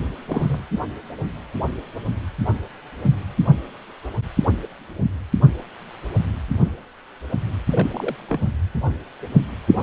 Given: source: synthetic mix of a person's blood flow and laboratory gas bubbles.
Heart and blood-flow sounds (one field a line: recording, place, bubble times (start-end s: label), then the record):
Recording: Doppler ultrasound of blood flow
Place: precordium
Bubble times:
0.29-0.66 s: bubbles
7.71-8.15 s: bubbles
8.28-8.40 s: bubbles
8.45-8.50 s: bubbles
9.73-9.82 s: bubbles
From the record:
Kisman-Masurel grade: 221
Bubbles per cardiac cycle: several, 3 to 8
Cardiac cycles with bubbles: 10 to 50%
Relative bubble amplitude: barely perceptible (0.100 to 0.250)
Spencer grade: 2 (many but less than half of the cardiac periods contain bubble signals, singularly or in groups)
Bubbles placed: only in the low amplitude regions of the cardiac cycle